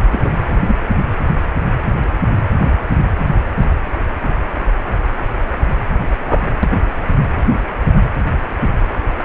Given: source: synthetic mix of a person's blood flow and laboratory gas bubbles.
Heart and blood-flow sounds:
Doppler ultrasound of blood flow; precordium
0.11-0.31 s: bubbles
0.67-0.74 s: bubbles
6.27-6.42 s: bubbles
6.63-6.67 s: bubbles
From the record:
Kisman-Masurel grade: 123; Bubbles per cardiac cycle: 1 to 2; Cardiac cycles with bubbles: 10 to 50%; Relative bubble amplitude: loud (0.450 to 0.775); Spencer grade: 2 (many but less than half of the cardiac periods contain bubble signals, singularly or in groups); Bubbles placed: anywhere in the cardiac cycle

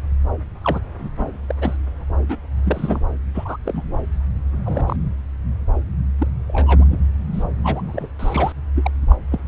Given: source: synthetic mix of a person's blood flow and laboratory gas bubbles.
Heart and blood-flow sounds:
Doppler ultrasound of blood flow; subclavian vein
0.62-0.79 s: bubbles
0.98-1.09 s: bubbles
1.15-1.37 s: bubbles
1.48-1.54 s: bubbles
1.61-1.76 s: bubbles
2.29-2.37 s: bubbles
2.65-2.99 s: bubbles
3.35-3.57 s: bubbles
3.65-3.97 s: bubbles
4.64-5.08 s: bubbles
6.18-6.27 s: bubbles
6.48-6.85 s: bubbles
6.91-6.99 s: bubbles
7.32-7.43 s: bubbles
7.63-8.07 s: bubbles
8.19-8.53 s: bubbles
8.75-8.91 s: bubbles
9.08-9.16 s: bubbles
9.31-9.40 s: bubbles
From the record:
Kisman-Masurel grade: 242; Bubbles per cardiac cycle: several, 3 to 8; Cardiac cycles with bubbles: 100%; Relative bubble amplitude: moderate (0.250 to 0.450); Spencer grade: 3 (all of the cardiac periods contain showers or single bubble signals, but not dominating or overriding the cardiac motion signals); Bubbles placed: anywhere in the cardiac cycle

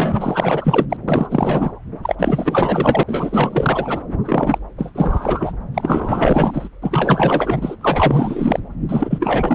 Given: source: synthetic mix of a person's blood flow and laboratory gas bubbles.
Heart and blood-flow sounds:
Doppler ultrasound of blood flow; subclavian vein
0.00-0.86 s: bubbles
0.89-0.96 s: bubbles
1.08-1.71 s: bubbles
2.02-2.15 s: bubbles
2.19-3.03 s: bubbles
3.06-4.00 s: bubbles
4.24-4.58 s: bubbles
4.78-4.92 s: bubbles
4.95-5.53 s: bubbles
5.74-6.69 s: bubbles
6.82-7.75 s: bubbles
7.81-8.59 s: bubbles
8.88-9.55 s: bubbles
From the record:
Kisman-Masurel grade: 444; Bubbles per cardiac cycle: continuous sound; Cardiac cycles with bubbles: 100%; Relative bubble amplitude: maximal (0.775 to 0.999); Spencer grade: 4 (maximum detectable bubble signal sounding continuously throughout systole and diastole of every cardiac period, and overriding the amplitude of the normal cardiac signals); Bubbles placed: anywhere in the cardiac cycle

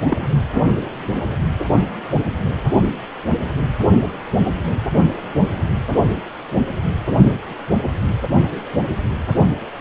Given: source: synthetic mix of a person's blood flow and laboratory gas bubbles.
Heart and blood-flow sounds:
Doppler ultrasound of blood flow; precordium
0.04-0.28 s: bubbles
From the record:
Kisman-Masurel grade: 212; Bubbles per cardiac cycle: several, 3 to 8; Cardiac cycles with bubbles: 1 to 10%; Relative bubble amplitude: moderate (0.250 to 0.450); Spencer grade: 1 (occasional bubble signal discernible with the cardiac motion signal, with majority of cardiac periods free of bubbles); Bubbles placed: anywhere in the cardiac cycle

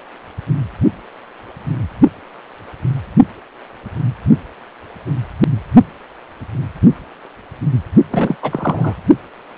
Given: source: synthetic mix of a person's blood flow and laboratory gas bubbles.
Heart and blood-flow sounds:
Doppler ultrasound of blood flow; precordium
8.10-8.35 s: bubbles
8.42-8.96 s: bubbles
From the record:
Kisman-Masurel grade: 223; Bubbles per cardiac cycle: several, 3 to 8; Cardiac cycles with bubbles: 10 to 50%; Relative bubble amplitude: loud (0.450 to 0.775); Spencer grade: 2 (many but less than half of the cardiac periods contain bubble signals, singularly or in groups); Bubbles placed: only in the low amplitude regions of the cardiac cycle

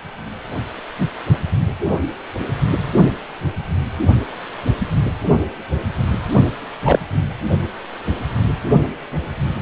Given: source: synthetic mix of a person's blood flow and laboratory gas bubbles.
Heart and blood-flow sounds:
Doppler ultrasound of blood flow; precordium
6.85-6.99 s: bubbles
From the record:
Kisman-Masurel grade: 113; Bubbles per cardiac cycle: 1 to 2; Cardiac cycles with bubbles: 1 to 10%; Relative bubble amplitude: loud (0.450 to 0.775); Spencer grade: 1 (occasional bubble signal discernible with the cardiac motion signal, with majority of cardiac periods free of bubbles); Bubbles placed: only in the low amplitude regions of the cardiac cycle

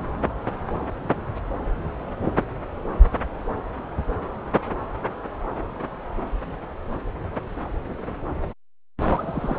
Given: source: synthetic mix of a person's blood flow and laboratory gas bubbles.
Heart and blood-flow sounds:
Doppler ultrasound of blood flow; subclavian vein
9.00-9.57 s: bubbles
From the record:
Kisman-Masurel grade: 211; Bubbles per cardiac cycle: several, 3 to 8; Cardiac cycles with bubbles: 1 to 10%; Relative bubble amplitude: barely perceptible (0.100 to 0.250); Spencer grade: 1 (occasional bubble signal discernible with the cardiac motion signal, with majority of cardiac periods free of bubbles); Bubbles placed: anywhere in the cardiac cycle

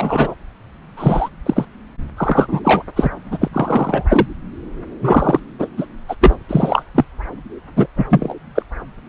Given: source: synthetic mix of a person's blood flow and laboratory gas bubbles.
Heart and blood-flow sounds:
Doppler ultrasound of blood flow; subclavian vein
0.00-0.35 s: bubbles
0.97-1.29 s: bubbles
1.46-1.65 s: bubbles
2.17-2.60 s: bubbles
2.64-2.83 s: bubbles
2.96-3.10 s: bubbles
3.31-3.38 s: bubbles
3.41-3.48 s: bubbles
3.52-4.05 s: bubbles
4.08-4.27 s: bubbles
5.01-5.40 s: bubbles
5.59-5.68 s: bubbles
5.77-5.86 s: bubbles
6.08-6.16 s: bubbles
6.21-6.37 s: bubbles
6.49-6.83 s: bubbles
6.95-7.04 s: bubbles
7.76-7.87 s: bubbles
7.97-8.05 s: bubbles
8.09-8.34 s: bubbles
8.54-8.62 s: bubbles
From the record:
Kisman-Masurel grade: 243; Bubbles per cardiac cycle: several, 3 to 8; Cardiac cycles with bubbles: 100%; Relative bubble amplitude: loud (0.450 to 0.775); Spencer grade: 3 (all of the cardiac periods contain showers or single bubble signals, but not dominating or overriding the cardiac motion signals); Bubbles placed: anywhere in the cardiac cycle

